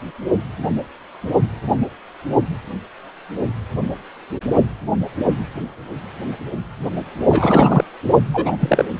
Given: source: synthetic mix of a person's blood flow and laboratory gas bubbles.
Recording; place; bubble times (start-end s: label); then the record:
Doppler ultrasound of blood flow; precordium
7.29-7.84 s: bubbles
8.33-8.57 s: bubbles
8.60-8.85 s: bubbles
From the record:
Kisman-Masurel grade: 223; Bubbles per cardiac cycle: several, 3 to 8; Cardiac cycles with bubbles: 10 to 50%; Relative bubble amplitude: loud (0.450 to 0.775); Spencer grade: 2 (many but less than half of the cardiac periods contain bubble signals, singularly or in groups); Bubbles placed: only in the low amplitude regions of the cardiac cycle